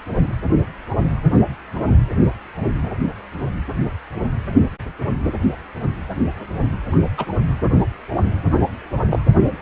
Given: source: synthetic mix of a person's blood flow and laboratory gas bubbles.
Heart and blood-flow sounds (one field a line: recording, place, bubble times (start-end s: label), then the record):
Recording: Doppler ultrasound of blood flow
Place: precordium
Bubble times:
6.92-6.96 s: bubbles
7.17-7.25 s: bubbles
9.09-9.19 s: bubbles
From the record:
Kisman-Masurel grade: 122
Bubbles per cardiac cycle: 1 to 2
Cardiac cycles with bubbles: 10 to 50%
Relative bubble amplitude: moderate (0.250 to 0.450)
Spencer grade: 2 (many but less than half of the cardiac periods contain bubble signals, singularly or in groups)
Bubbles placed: anywhere in the cardiac cycle